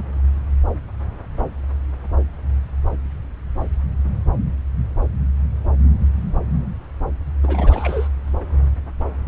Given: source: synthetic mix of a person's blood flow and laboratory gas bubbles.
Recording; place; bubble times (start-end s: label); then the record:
Doppler ultrasound of blood flow; subclavian vein
7.43-8.08 s: bubbles
From the record:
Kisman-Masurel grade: 211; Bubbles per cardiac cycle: several, 3 to 8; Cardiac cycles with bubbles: 1 to 10%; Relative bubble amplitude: barely perceptible (0.100 to 0.250); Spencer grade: 1 (occasional bubble signal discernible with the cardiac motion signal, with majority of cardiac periods free of bubbles); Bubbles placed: anywhere in the cardiac cycle